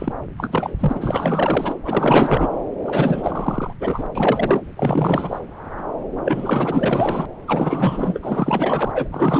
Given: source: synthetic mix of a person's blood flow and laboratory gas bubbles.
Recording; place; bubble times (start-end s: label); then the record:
Doppler ultrasound of blood flow; subclavian vein
0.00-0.12 s: bubbles
0.37-1.74 s: bubbles
1.83-2.50 s: bubbles
2.85-3.73 s: bubbles
3.80-4.04 s: bubbles
4.15-4.60 s: bubbles
4.76-5.38 s: bubbles
6.25-7.26 s: bubbles
7.46-8.91 s: bubbles
8.94-9.08 s: bubbles
9.11-9.39 s: bubbles
From the record:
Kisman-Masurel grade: 444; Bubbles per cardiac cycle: continuous sound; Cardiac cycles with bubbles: 100%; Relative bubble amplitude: maximal (0.775 to 0.999); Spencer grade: 4 (maximum detectable bubble signal sounding continuously throughout systole and diastole of every cardiac period, and overriding the amplitude of the normal cardiac signals); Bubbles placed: anywhere in the cardiac cycle